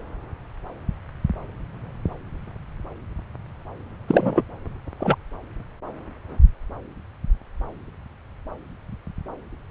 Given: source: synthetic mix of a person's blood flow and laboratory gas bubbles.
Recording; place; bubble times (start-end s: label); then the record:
Doppler ultrasound of blood flow; subclavian vein
4.07-4.42 s: bubbles
5.00-5.15 s: bubbles
From the record:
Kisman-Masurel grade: 123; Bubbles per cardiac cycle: 1 to 2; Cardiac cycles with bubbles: 10 to 50%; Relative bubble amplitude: loud (0.450 to 0.775); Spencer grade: 2 (many but less than half of the cardiac periods contain bubble signals, singularly or in groups); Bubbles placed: anywhere in the cardiac cycle